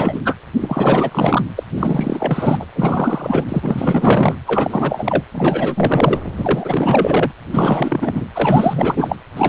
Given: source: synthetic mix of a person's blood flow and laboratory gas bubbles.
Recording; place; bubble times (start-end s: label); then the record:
Doppler ultrasound of blood flow; precordium
0.00-0.22 s: bubbles
0.25-0.35 s: bubbles
0.60-1.42 s: bubbles
1.56-1.63 s: bubbles
1.74-2.66 s: bubbles
2.75-3.44 s: bubbles
3.48-4.36 s: bubbles
4.47-5.23 s: bubbles
5.31-6.19 s: bubbles
6.37-7.32 s: bubbles
7.50-8.25 s: bubbles
8.33-9.16 s: bubbles
9.37-9.49 s: bubbles
From the record:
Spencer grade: 4 (maximum detectable bubble signal sounding continuously throughout systole and diastole of every cardiac period, and overriding the amplitude of the normal cardiac signals); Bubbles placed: anywhere in the cardiac cycle